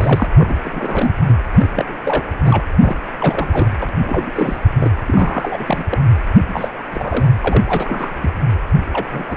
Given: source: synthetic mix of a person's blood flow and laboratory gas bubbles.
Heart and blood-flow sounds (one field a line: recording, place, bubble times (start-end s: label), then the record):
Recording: Doppler ultrasound of blood flow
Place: precordium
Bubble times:
0.00-0.27 s: bubbles
0.36-0.55 s: bubbles
0.63-1.15 s: bubbles
1.29-1.33 s: bubbles
1.59-1.69 s: bubbles
1.75-1.96 s: bubbles
2.04-2.23 s: bubbles
2.43-2.64 s: bubbles
2.82-2.96 s: bubbles
3.19-3.71 s: bubbles
3.80-3.89 s: bubbles
4.04-4.33 s: bubbles
4.35-4.57 s: bubbles
4.79-4.91 s: bubbles
5.07-5.85 s: bubbles
5.91-6.03 s: bubbles
6.47-6.69 s: bubbles
6.87-7.27 s: bubbles
7.41-7.62 s: bubbles
7.66-8.15 s: bubbles
8.21-8.31 s: bubbles
8.93-9.06 s: bubbles
9.12-9.26 s: bubbles
9.29-9.37 s: bubbles
From the record:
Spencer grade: 3 (all of the cardiac periods contain showers or single bubble signals, but not dominating or overriding the cardiac motion signals)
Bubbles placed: anywhere in the cardiac cycle